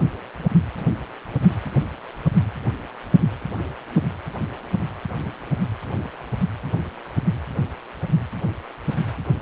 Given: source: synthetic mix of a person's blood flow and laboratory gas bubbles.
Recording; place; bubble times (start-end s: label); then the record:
Doppler ultrasound of blood flow; precordium
no bubbles
From the record:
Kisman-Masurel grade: 000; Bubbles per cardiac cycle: 0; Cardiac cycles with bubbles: 0%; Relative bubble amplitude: no bubbles discernible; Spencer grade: 0 (complete lack of bubble signals)